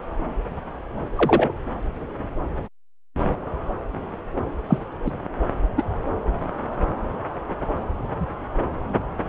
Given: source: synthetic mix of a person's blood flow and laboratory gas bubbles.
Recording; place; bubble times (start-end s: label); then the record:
Doppler ultrasound of blood flow; subclavian vein
1.16-1.52 s: bubbles
4.67-4.79 s: bubbles
5.05-5.11 s: bubbles
5.77-5.83 s: bubbles
From the record:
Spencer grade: 2 (many but less than half of the cardiac periods contain bubble signals, singularly or in groups); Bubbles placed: anywhere in the cardiac cycle